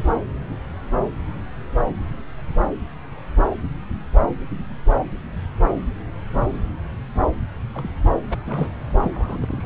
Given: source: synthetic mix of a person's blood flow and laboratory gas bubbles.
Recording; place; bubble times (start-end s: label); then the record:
Doppler ultrasound of blood flow; subclavian vein
7.75-7.91 s: bubbles
8.29-8.38 s: bubbles
8.47-8.69 s: bubbles
9.02-9.66 s: bubbles
From the record:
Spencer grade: 2 (many but less than half of the cardiac periods contain bubble signals, singularly or in groups); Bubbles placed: anywhere in the cardiac cycle